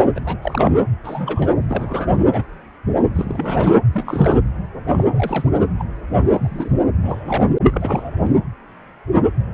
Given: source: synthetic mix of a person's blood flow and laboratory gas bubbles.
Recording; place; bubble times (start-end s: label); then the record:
Doppler ultrasound of blood flow; precordium
0.15-0.21 s: bubbles
0.24-0.37 s: bubbles
0.41-0.71 s: bubbles
1.03-1.48 s: bubbles
1.68-2.44 s: bubbles
3.15-3.74 s: bubbles
3.92-4.37 s: bubbles
4.87-5.07 s: bubbles
5.11-5.50 s: bubbles
5.79-5.84 s: bubbles
6.23-6.71 s: bubbles
7.03-7.46 s: bubbles
7.71-8.12 s: bubbles
8.21-8.35 s: bubbles
From the record:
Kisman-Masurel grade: 232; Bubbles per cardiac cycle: several, 3 to 8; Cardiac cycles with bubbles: 50 to 99%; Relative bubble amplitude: moderate (0.250 to 0.450); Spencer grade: 3 (all of the cardiac periods contain showers or single bubble signals, but not dominating or overriding the cardiac motion signals); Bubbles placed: anywhere in the cardiac cycle